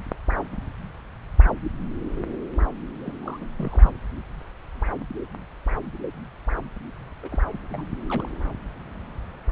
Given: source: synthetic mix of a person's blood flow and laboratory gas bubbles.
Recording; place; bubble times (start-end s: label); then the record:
Doppler ultrasound of blood flow; subclavian vein
3.00-3.17 s: bubbles
3.22-3.45 s: bubbles
3.56-3.90 s: bubbles
7.23-7.39 s: bubbles
7.53-7.58 s: bubbles
7.70-7.87 s: bubbles
8.08-8.28 s: bubbles
From the record:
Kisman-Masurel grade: 221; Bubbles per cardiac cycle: several, 3 to 8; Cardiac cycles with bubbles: 10 to 50%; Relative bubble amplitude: barely perceptible (0.100 to 0.250); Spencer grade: 2 (many but less than half of the cardiac periods contain bubble signals, singularly or in groups); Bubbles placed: anywhere in the cardiac cycle